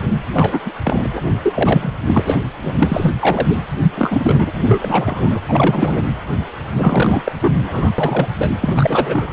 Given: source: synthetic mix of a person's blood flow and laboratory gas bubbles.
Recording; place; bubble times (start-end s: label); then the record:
Doppler ultrasound of blood flow; precordium
0.33-0.59 s: bubbles
0.65-0.72 s: bubbles
0.83-1.07 s: bubbles
1.14-1.22 s: bubbles
1.43-1.98 s: bubbles
2.07-2.40 s: bubbles
2.62-2.75 s: bubbles
2.78-3.13 s: bubbles
3.19-3.56 s: bubbles
3.97-4.53 s: bubbles
4.62-5.40 s: bubbles
5.48-6.03 s: bubbles
6.78-7.32 s: bubbles
7.41-7.53 s: bubbles
7.62-7.91 s: bubbles
7.98-8.28 s: bubbles
8.38-8.50 s: bubbles
8.61-9.28 s: bubbles
From the record:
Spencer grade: 3 (all of the cardiac periods contain showers or single bubble signals, but not dominating or overriding the cardiac motion signals); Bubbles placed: anywhere in the cardiac cycle